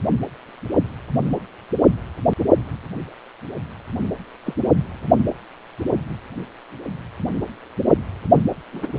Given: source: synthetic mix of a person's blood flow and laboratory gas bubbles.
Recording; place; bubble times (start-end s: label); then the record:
Doppler ultrasound of blood flow; precordium
4.46-4.54 s: bubbles
8.72-8.92 s: bubbles
From the record:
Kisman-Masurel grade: 121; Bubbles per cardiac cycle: 1 to 2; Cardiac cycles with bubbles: 10 to 50%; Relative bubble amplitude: barely perceptible (0.100 to 0.250); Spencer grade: 2 (many but less than half of the cardiac periods contain bubble signals, singularly or in groups); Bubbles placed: only in the low amplitude regions of the cardiac cycle